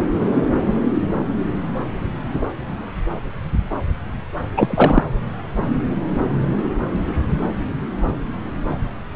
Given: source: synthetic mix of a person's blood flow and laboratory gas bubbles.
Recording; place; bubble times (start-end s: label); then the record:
Doppler ultrasound of blood flow; subclavian vein
4.56-5.03 s: bubbles
From the record:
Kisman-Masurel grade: 213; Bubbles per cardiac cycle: several, 3 to 8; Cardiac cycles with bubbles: 1 to 10%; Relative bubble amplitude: loud (0.450 to 0.775); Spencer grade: 1 (occasional bubble signal discernible with the cardiac motion signal, with majority of cardiac periods free of bubbles); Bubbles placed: anywhere in the cardiac cycle